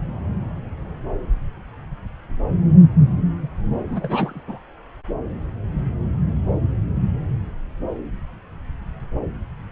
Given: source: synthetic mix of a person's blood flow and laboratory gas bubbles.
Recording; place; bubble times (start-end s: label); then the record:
Doppler ultrasound of blood flow; subclavian vein
3.89-4.44 s: bubbles
4.48-4.58 s: bubbles
From the record:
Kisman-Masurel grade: 211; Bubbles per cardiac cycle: several, 3 to 8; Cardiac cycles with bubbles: 1 to 10%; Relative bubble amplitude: barely perceptible (0.100 to 0.250); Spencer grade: 1 (occasional bubble signal discernible with the cardiac motion signal, with majority of cardiac periods free of bubbles); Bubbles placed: anywhere in the cardiac cycle